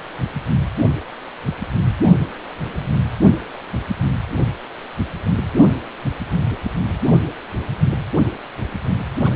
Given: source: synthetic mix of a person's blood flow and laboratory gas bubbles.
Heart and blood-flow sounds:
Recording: Doppler ultrasound of blood flow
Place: precordium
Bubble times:
9.20-9.35 s: bubbles
From the record:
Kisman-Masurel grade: 211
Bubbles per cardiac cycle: several, 3 to 8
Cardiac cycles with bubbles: 1 to 10%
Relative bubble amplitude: barely perceptible (0.100 to 0.250)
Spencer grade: 1 (occasional bubble signal discernible with the cardiac motion signal, with majority of cardiac periods free of bubbles)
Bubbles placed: anywhere in the cardiac cycle

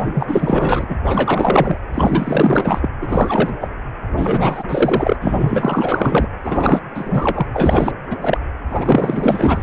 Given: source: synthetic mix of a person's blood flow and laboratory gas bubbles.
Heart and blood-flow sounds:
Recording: Doppler ultrasound of blood flow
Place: precordium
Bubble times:
0.00-0.85 s: bubbles
0.88-0.99 s: bubbles
1.03-1.78 s: bubbles
1.92-2.89 s: bubbles
3.02-3.56 s: bubbles
3.60-3.68 s: bubbles
4.11-4.63 s: bubbles
4.69-5.16 s: bubbles
5.21-6.29 s: bubbles
6.42-6.80 s: bubbles
6.94-7.46 s: bubbles
7.54-7.94 s: bubbles
8.10-8.16 s: bubbles
8.21-8.38 s: bubbles
8.70-9.62 s: bubbles
From the record:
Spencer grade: 4 (maximum detectable bubble signal sounding continuously throughout systole and diastole of every cardiac period, and overriding the amplitude of the normal cardiac signals)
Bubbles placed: anywhere in the cardiac cycle

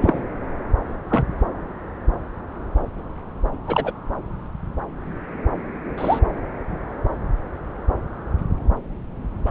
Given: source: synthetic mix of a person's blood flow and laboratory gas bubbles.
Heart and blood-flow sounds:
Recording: Doppler ultrasound of blood flow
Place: subclavian vein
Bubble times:
0.01-0.23 s: bubbles
1.08-1.26 s: bubbles
3.67-3.92 s: bubbles
5.97-6.19 s: bubbles
9.46-9.50 s: bubbles
From the record:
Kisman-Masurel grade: 122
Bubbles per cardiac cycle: 1 to 2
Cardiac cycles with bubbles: 10 to 50%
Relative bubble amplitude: moderate (0.250 to 0.450)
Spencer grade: 2 (many but less than half of the cardiac periods contain bubble signals, singularly or in groups)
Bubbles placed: anywhere in the cardiac cycle

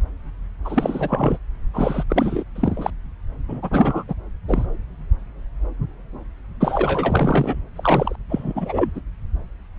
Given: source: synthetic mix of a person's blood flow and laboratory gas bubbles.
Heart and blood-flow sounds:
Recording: Doppler ultrasound of blood flow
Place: subclavian vein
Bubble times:
0.65-1.38 s: bubbles
1.73-2.04 s: bubbles
2.10-2.44 s: bubbles
2.55-2.90 s: bubbles
3.48-4.04 s: bubbles
4.08-4.15 s: bubbles
4.48-4.66 s: bubbles
6.60-7.56 s: bubbles
7.76-8.16 s: bubbles
8.29-8.91 s: bubbles
8.95-9.01 s: bubbles
From the record:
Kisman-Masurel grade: 332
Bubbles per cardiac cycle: rolling drumbeat, 9 or more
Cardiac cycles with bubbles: 50 to 99%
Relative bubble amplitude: moderate (0.250 to 0.450)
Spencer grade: 3 (all of the cardiac periods contain showers or single bubble signals, but not dominating or overriding the cardiac motion signals)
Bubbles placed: anywhere in the cardiac cycle

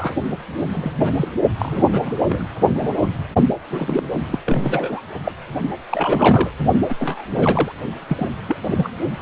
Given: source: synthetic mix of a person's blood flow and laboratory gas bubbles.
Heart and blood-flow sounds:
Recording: Doppler ultrasound of blood flow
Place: precordium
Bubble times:
0.00-0.15 s: bubbles
0.72-0.97 s: bubbles
1.00-1.13 s: bubbles
1.16-1.32 s: bubbles
1.59-2.15 s: bubbles
2.26-2.47 s: bubbles
2.68-2.93 s: bubbles
3.01-3.08 s: bubbles
3.71-4.03 s: bubbles
4.31-4.39 s: bubbles
4.46-5.01 s: bubbles
5.25-5.32 s: bubbles
5.89-6.50 s: bubbles
6.89-6.95 s: bubbles
7.00-7.23 s: bubbles
7.35-7.72 s: bubbles
8.07-8.31 s: bubbles
8.47-8.56 s: bubbles
8.62-8.89 s: bubbles
9.18-9.22 s: bubbles
From the record:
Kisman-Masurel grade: 242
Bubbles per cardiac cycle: several, 3 to 8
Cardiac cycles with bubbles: 100%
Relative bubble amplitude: moderate (0.250 to 0.450)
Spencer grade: 3 (all of the cardiac periods contain showers or single bubble signals, but not dominating or overriding the cardiac motion signals)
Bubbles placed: only in the low amplitude regions of the cardiac cycle

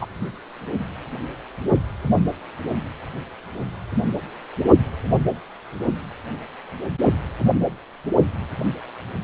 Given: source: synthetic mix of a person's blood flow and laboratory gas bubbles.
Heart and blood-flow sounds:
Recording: Doppler ultrasound of blood flow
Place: precordium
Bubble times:
0.01-0.06 s: bubbles
From the record:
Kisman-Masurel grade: 113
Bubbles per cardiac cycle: 1 to 2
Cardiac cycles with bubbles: 1 to 10%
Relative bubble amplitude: loud (0.450 to 0.775)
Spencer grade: 1 (occasional bubble signal discernible with the cardiac motion signal, with majority of cardiac periods free of bubbles)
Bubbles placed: only in the low amplitude regions of the cardiac cycle

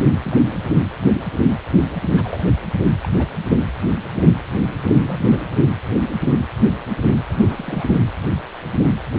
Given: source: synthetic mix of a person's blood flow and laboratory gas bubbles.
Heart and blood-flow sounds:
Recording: Doppler ultrasound of blood flow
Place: precordium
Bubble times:
0.00-0.17 s: bubbles
0.24-0.38 s: bubbles
2.17-2.51 s: bubbles
3.04-3.08 s: bubbles
3.18-3.30 s: bubbles
4.88-4.95 s: bubbles
5.00-5.42 s: bubbles
7.29-7.33 s: bubbles
7.39-7.96 s: bubbles
From the record:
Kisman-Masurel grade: 221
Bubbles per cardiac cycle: several, 3 to 8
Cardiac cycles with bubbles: 10 to 50%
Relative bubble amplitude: barely perceptible (0.100 to 0.250)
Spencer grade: 2 (many but less than half of the cardiac periods contain bubble signals, singularly or in groups)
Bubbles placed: anywhere in the cardiac cycle

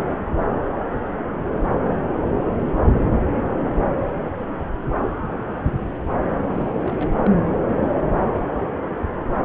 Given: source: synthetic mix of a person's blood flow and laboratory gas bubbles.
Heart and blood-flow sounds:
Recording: Doppler ultrasound of blood flow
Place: subclavian vein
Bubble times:
6.54-6.80 s: bubbles
6.83-7.10 s: bubbles
7.25-7.30 s: bubbles
From the record:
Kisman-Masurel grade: 211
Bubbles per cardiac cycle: several, 3 to 8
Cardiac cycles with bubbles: 1 to 10%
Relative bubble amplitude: barely perceptible (0.100 to 0.250)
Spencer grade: 1 (occasional bubble signal discernible with the cardiac motion signal, with majority of cardiac periods free of bubbles)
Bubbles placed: anywhere in the cardiac cycle

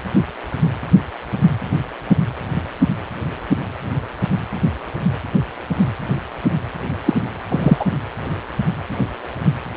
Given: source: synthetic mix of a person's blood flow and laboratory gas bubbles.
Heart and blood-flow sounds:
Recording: Doppler ultrasound of blood flow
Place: precordium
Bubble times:
7.05-7.13 s: bubbles
7.48-7.85 s: bubbles
From the record:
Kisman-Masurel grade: 123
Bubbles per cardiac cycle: 1 to 2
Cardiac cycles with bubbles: 10 to 50%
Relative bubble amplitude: loud (0.450 to 0.775)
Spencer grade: 2 (many but less than half of the cardiac periods contain bubble signals, singularly or in groups)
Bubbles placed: anywhere in the cardiac cycle

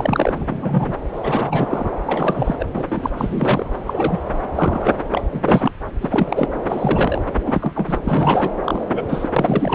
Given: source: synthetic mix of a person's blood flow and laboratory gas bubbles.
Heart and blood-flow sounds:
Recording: Doppler ultrasound of blood flow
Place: subclavian vein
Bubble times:
0.00-0.96 s: bubbles
1.14-1.89 s: bubbles
2.06-2.56 s: bubbles
2.59-2.66 s: bubbles
2.75-3.10 s: bubbles
3.17-3.66 s: bubbles
3.86-4.18 s: bubbles
4.55-4.92 s: bubbles
5.09-5.21 s: bubbles
5.33-5.71 s: bubbles
6.00-6.47 s: bubbles
6.68-7.21 s: bubbles
7.32-7.72 s: bubbles
7.75-7.97 s: bubbles
8.04-8.50 s: bubbles
8.64-8.81 s: bubbles
8.88-9.04 s: bubbles
9.08-9.29 s: bubbles
9.36-9.75 s: bubbles
From the record:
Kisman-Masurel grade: 242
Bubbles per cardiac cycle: several, 3 to 8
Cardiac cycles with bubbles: 100%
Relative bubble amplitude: moderate (0.250 to 0.450)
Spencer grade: 3 (all of the cardiac periods contain showers or single bubble signals, but not dominating or overriding the cardiac motion signals)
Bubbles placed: anywhere in the cardiac cycle

